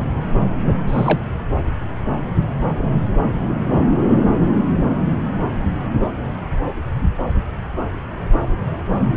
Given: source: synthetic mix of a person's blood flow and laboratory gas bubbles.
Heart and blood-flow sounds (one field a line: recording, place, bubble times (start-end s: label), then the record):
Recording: Doppler ultrasound of blood flow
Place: subclavian vein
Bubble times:
0.88-1.20 s: bubbles
From the record:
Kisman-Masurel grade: 212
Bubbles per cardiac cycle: several, 3 to 8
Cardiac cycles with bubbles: 1 to 10%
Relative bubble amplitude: moderate (0.250 to 0.450)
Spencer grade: 1 (occasional bubble signal discernible with the cardiac motion signal, with majority of cardiac periods free of bubbles)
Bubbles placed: anywhere in the cardiac cycle